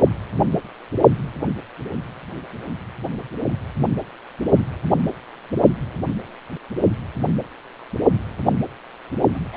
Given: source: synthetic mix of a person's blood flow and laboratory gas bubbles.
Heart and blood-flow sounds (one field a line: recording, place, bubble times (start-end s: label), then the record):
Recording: Doppler ultrasound of blood flow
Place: precordium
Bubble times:
9.34-9.44 s: bubbles
9.52-9.57 s: bubbles
From the record:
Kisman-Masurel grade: 121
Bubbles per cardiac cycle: 1 to 2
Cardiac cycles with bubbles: 10 to 50%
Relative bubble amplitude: barely perceptible (0.100 to 0.250)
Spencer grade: 2 (many but less than half of the cardiac periods contain bubble signals, singularly or in groups)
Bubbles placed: only in the low amplitude regions of the cardiac cycle